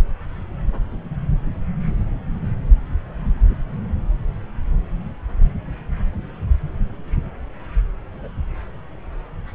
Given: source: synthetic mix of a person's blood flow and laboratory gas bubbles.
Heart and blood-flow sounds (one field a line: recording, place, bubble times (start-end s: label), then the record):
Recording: Doppler ultrasound of blood flow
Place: subclavian vein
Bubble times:
3.48-3.56 s: bubbles
8.12-8.28 s: bubbles
From the record:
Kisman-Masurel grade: 121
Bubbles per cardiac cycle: 1 to 2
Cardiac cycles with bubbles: 10 to 50%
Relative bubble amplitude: barely perceptible (0.100 to 0.250)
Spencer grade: 2 (many but less than half of the cardiac periods contain bubble signals, singularly or in groups)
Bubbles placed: anywhere in the cardiac cycle